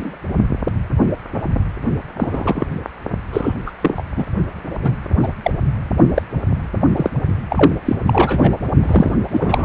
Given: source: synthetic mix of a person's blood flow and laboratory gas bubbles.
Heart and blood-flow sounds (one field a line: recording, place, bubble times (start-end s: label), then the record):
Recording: Doppler ultrasound of blood flow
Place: precordium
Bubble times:
0.00-0.17 s: bubbles
2.19-2.67 s: bubbles
3.33-3.54 s: bubbles
3.66-3.71 s: bubbles
3.82-4.03 s: bubbles
4.17-4.25 s: bubbles
4.81-4.96 s: bubbles
5.22-5.28 s: bubbles
5.42-5.51 s: bubbles
6.15-6.22 s: bubbles
6.96-7.10 s: bubbles
7.50-7.72 s: bubbles
7.85-7.96 s: bubbles
8.06-8.52 s: bubbles
8.82-9.14 s: bubbles
9.31-9.65 s: bubbles
From the record:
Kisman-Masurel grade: 233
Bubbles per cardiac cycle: several, 3 to 8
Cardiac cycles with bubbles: 50 to 99%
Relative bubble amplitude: loud (0.450 to 0.775)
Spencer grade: 3 (all of the cardiac periods contain showers or single bubble signals, but not dominating or overriding the cardiac motion signals)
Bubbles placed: only in the low amplitude regions of the cardiac cycle